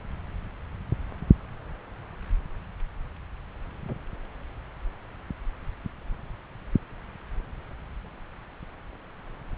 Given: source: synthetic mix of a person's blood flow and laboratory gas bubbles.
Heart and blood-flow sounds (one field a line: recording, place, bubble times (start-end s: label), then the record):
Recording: Doppler ultrasound of blood flow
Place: subclavian vein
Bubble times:
3.88-3.96 s: bubbles
From the record:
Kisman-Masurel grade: 111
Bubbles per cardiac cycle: 1 to 2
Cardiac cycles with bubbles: 1 to 10%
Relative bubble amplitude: barely perceptible (0.100 to 0.250)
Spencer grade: 1 (occasional bubble signal discernible with the cardiac motion signal, with majority of cardiac periods free of bubbles)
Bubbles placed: anywhere in the cardiac cycle